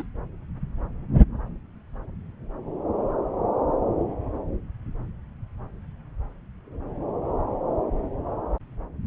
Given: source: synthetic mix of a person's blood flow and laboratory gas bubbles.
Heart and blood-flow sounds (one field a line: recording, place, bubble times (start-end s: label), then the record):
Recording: Doppler ultrasound of blood flow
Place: subclavian vein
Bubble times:
0.00-0.06 s: bubbles
From the record:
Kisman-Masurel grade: 112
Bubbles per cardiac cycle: 1 to 2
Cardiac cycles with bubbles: 1 to 10%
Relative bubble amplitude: moderate (0.250 to 0.450)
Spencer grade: 1 (occasional bubble signal discernible with the cardiac motion signal, with majority of cardiac periods free of bubbles)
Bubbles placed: anywhere in the cardiac cycle